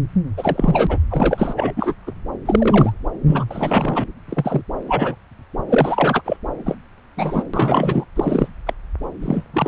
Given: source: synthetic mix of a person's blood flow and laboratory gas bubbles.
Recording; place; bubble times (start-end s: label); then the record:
Doppler ultrasound of blood flow; subclavian vein
0.36-0.97 s: bubbles
1.09-1.72 s: bubbles
1.75-1.94 s: bubbles
2.07-2.12 s: bubbles
2.45-2.93 s: bubbles
3.27-3.46 s: bubbles
3.51-4.04 s: bubbles
4.29-4.62 s: bubbles
4.87-5.16 s: bubbles
5.69-6.21 s: bubbles
6.25-6.37 s: bubbles
6.66-6.77 s: bubbles
7.17-7.43 s: bubbles
7.54-8.05 s: bubbles
8.15-8.48 s: bubbles
8.66-8.73 s: bubbles
9.22-9.44 s: bubbles
9.53-9.68 s: bubbles
From the record:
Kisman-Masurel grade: 243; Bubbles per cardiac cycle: several, 3 to 8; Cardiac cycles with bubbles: 100%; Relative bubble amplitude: loud (0.450 to 0.775); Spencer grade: 3 (all of the cardiac periods contain showers or single bubble signals, but not dominating or overriding the cardiac motion signals); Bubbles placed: anywhere in the cardiac cycle